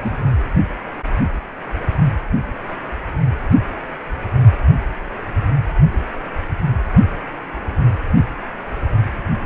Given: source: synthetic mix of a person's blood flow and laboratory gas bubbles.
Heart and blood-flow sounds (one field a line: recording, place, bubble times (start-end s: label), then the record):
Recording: Doppler ultrasound of blood flow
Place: precordium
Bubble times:
0.00-0.26 s: bubbles
From the record:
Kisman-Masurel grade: 221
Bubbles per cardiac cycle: several, 3 to 8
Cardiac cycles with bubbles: 10 to 50%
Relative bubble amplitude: barely perceptible (0.100 to 0.250)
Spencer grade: 2 (many but less than half of the cardiac periods contain bubble signals, singularly or in groups)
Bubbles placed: anywhere in the cardiac cycle